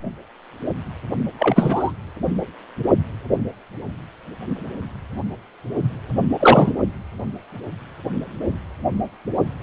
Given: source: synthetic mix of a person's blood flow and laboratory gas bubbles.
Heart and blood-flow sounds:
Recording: Doppler ultrasound of blood flow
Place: precordium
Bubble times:
1.39-1.93 s: bubbles
6.37-6.71 s: bubbles
From the record:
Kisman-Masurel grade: 213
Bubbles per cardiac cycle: several, 3 to 8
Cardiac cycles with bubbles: 1 to 10%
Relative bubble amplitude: loud (0.450 to 0.775)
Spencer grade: 1 (occasional bubble signal discernible with the cardiac motion signal, with majority of cardiac periods free of bubbles)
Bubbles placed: anywhere in the cardiac cycle

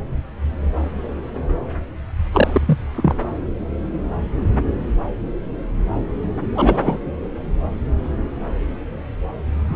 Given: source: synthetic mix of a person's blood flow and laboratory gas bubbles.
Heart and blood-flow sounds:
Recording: Doppler ultrasound of blood flow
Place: subclavian vein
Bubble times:
2.32-2.78 s: bubbles
2.95-3.15 s: bubbles
6.54-7.00 s: bubbles
9.69-9.76 s: bubbles
From the record:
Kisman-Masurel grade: 223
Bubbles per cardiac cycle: several, 3 to 8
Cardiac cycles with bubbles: 10 to 50%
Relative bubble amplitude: loud (0.450 to 0.775)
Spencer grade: 2 (many but less than half of the cardiac periods contain bubble signals, singularly or in groups)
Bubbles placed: anywhere in the cardiac cycle

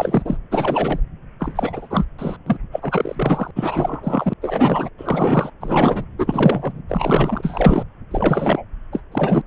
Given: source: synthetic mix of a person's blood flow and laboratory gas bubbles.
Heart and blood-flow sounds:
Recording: Doppler ultrasound of blood flow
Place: subclavian vein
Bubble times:
0.00-0.38 s: bubbles
0.51-1.00 s: bubbles
1.39-2.05 s: bubbles
2.19-2.36 s: bubbles
2.46-2.57 s: bubbles
2.72-3.51 s: bubbles
3.56-4.33 s: bubbles
4.41-4.90 s: bubbles
4.98-5.50 s: bubbles
5.60-6.05 s: bubbles
6.18-6.82 s: bubbles
6.88-7.84 s: bubbles
8.11-8.65 s: bubbles
8.92-9.02 s: bubbles
9.12-9.42 s: bubbles
From the record:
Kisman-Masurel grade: 343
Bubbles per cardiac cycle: rolling drumbeat, 9 or more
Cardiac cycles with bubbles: 100%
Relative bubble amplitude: loud (0.450 to 0.775)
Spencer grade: 3 (all of the cardiac periods contain showers or single bubble signals, but not dominating or overriding the cardiac motion signals)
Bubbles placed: anywhere in the cardiac cycle

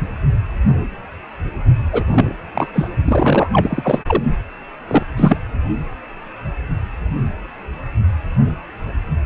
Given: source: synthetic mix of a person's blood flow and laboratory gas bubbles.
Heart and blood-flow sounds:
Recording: Doppler ultrasound of blood flow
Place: precordium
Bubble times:
1.92-2.03 s: bubbles
2.11-2.35 s: bubbles
2.53-2.67 s: bubbles
2.73-2.88 s: bubbles
3.04-3.49 s: bubbles
3.52-4.02 s: bubbles
4.07-4.24 s: bubbles
4.88-5.03 s: bubbles
5.17-5.37 s: bubbles
From the record:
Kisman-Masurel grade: 223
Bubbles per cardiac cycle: several, 3 to 8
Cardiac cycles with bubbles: 10 to 50%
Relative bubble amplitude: loud (0.450 to 0.775)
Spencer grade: 2 (many but less than half of the cardiac periods contain bubble signals, singularly or in groups)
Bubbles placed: only in the low amplitude regions of the cardiac cycle

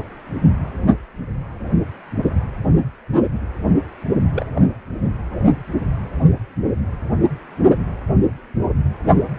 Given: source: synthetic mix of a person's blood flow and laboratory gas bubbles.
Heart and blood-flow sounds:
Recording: Doppler ultrasound of blood flow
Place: precordium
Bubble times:
4.33-4.46 s: bubbles
4.56-4.62 s: bubbles
From the record:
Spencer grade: 1 (occasional bubble signal discernible with the cardiac motion signal, with majority of cardiac periods free of bubbles)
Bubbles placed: only in the low amplitude regions of the cardiac cycle

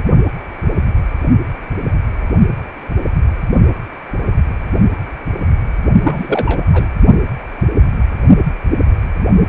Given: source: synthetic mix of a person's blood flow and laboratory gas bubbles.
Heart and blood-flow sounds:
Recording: Doppler ultrasound of blood flow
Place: precordium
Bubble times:
6.02-6.65 s: bubbles
6.71-6.89 s: bubbles
From the record:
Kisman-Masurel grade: 213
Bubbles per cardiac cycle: several, 3 to 8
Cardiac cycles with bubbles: 1 to 10%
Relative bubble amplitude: loud (0.450 to 0.775)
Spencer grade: 1 (occasional bubble signal discernible with the cardiac motion signal, with majority of cardiac periods free of bubbles)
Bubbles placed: only in the low amplitude regions of the cardiac cycle

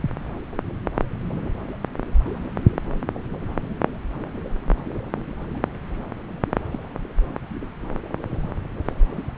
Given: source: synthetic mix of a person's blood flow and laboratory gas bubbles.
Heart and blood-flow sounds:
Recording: Doppler ultrasound of blood flow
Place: subclavian vein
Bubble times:
6.72-6.79 s: bubbles
From the record:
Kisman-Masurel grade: 121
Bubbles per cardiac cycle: 1 to 2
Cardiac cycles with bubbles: 10 to 50%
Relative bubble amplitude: barely perceptible (0.100 to 0.250)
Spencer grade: 2 (many but less than half of the cardiac periods contain bubble signals, singularly or in groups)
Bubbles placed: anywhere in the cardiac cycle

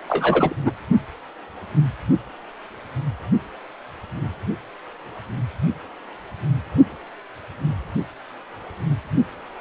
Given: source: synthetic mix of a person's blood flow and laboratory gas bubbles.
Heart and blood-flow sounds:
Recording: Doppler ultrasound of blood flow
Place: precordium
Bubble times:
0.08-0.55 s: bubbles
0.65-0.72 s: bubbles
From the record:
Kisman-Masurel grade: 212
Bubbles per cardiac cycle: several, 3 to 8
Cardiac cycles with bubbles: 1 to 10%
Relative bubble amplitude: moderate (0.250 to 0.450)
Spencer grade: 1 (occasional bubble signal discernible with the cardiac motion signal, with majority of cardiac periods free of bubbles)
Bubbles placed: only in the low amplitude regions of the cardiac cycle

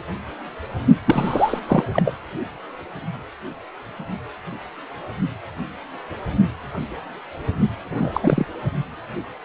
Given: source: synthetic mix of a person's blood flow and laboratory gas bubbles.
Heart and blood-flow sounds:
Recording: Doppler ultrasound of blood flow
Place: precordium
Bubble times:
1.05-1.59 s: bubbles
1.68-1.84 s: bubbles
1.93-2.15 s: bubbles
7.91-8.46 s: bubbles
From the record:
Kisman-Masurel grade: 223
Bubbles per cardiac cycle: several, 3 to 8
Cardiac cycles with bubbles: 10 to 50%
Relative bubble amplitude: loud (0.450 to 0.775)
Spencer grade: 2 (many but less than half of the cardiac periods contain bubble signals, singularly or in groups)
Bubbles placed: only in the low amplitude regions of the cardiac cycle

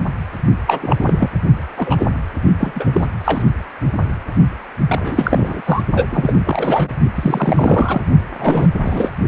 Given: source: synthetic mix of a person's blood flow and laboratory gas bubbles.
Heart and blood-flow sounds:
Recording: Doppler ultrasound of blood flow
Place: precordium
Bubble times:
0.66-1.29 s: bubbles
1.76-2.10 s: bubbles
2.60-2.72 s: bubbles
2.75-3.06 s: bubbles
3.24-3.43 s: bubbles
4.88-5.61 s: bubbles
5.67-5.82 s: bubbles
5.94-6.05 s: bubbles
6.10-6.36 s: bubbles
6.46-6.99 s: bubbles
7.14-8.01 s: bubbles
8.39-8.69 s: bubbles
8.84-9.11 s: bubbles
From the record:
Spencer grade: 3 (all of the cardiac periods contain showers or single bubble signals, but not dominating or overriding the cardiac motion signals)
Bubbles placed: only in the low amplitude regions of the cardiac cycle

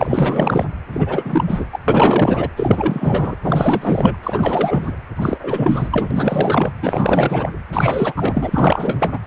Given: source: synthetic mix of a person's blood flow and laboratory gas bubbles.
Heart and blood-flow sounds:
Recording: Doppler ultrasound of blood flow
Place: precordium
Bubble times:
0.00-0.65 s: bubbles
0.92-1.68 s: bubbles
1.72-1.79 s: bubbles
1.88-2.50 s: bubbles
2.56-3.36 s: bubbles
3.42-4.18 s: bubbles
4.23-4.93 s: bubbles
5.15-5.38 s: bubbles
5.42-5.89 s: bubbles
5.92-6.71 s: bubbles
6.81-7.50 s: bubbles
7.72-8.13 s: bubbles
8.16-9.19 s: bubbles
From the record:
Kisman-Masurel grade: 444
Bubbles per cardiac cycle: continuous sound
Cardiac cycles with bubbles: 100%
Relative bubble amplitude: maximal (0.775 to 0.999)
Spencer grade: 4 (maximum detectable bubble signal sounding continuously throughout systole and diastole of every cardiac period, and overriding the amplitude of the normal cardiac signals)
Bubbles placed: anywhere in the cardiac cycle

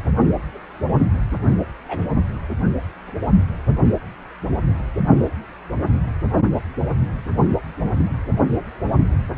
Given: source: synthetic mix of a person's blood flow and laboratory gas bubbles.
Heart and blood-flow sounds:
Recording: Doppler ultrasound of blood flow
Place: precordium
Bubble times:
1.88-2.06 s: bubbles
From the record:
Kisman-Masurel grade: 111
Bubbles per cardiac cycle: 1 to 2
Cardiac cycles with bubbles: 1 to 10%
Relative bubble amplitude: barely perceptible (0.100 to 0.250)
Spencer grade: 1 (occasional bubble signal discernible with the cardiac motion signal, with majority of cardiac periods free of bubbles)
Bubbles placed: only in the low amplitude regions of the cardiac cycle

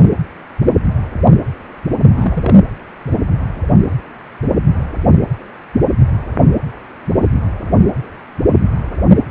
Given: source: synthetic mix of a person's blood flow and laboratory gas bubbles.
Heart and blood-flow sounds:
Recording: Doppler ultrasound of blood flow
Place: precordium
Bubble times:
0.00-0.05 s: bubbles
2.13-2.55 s: bubbles
From the record:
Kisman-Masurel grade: 112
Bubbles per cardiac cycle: 1 to 2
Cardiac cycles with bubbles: 1 to 10%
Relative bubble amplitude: moderate (0.250 to 0.450)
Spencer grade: 1 (occasional bubble signal discernible with the cardiac motion signal, with majority of cardiac periods free of bubbles)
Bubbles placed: anywhere in the cardiac cycle

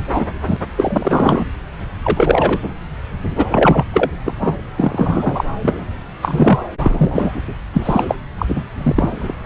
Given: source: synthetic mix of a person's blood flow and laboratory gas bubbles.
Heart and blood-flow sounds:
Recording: Doppler ultrasound of blood flow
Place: subclavian vein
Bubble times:
0.12-0.24 s: bubbles
0.47-0.57 s: bubbles
0.77-1.46 s: bubbles
2.04-2.73 s: bubbles
3.35-3.44 s: bubbles
3.48-3.85 s: bubbles
3.93-4.10 s: bubbles
4.25-4.33 s: bubbles
4.41-4.56 s: bubbles
4.76-5.50 s: bubbles
5.62-5.84 s: bubbles
6.21-6.59 s: bubbles
6.83-7.32 s: bubbles
7.73-8.04 s: bubbles
8.08-8.16 s: bubbles
8.38-8.46 s: bubbles
8.48-8.64 s: bubbles
8.78-9.35 s: bubbles
From the record:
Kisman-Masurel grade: 333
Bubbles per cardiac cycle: rolling drumbeat, 9 or more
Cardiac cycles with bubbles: 50 to 99%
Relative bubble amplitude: loud (0.450 to 0.775)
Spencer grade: 3 (all of the cardiac periods contain showers or single bubble signals, but not dominating or overriding the cardiac motion signals)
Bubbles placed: anywhere in the cardiac cycle

